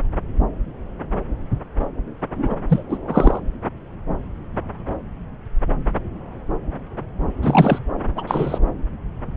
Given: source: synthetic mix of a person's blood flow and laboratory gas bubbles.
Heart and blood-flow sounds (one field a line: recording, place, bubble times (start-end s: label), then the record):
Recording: Doppler ultrasound of blood flow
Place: subclavian vein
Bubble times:
2.35-2.55 s: bubbles
2.69-2.83 s: bubbles
2.89-2.98 s: bubbles
3.07-3.41 s: bubbles
7.42-7.78 s: bubbles
8.16-8.24 s: bubbles
8.27-8.58 s: bubbles
From the record:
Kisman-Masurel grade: 223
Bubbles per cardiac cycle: several, 3 to 8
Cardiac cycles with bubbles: 10 to 50%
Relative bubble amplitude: loud (0.450 to 0.775)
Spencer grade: 2 (many but less than half of the cardiac periods contain bubble signals, singularly or in groups)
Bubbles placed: anywhere in the cardiac cycle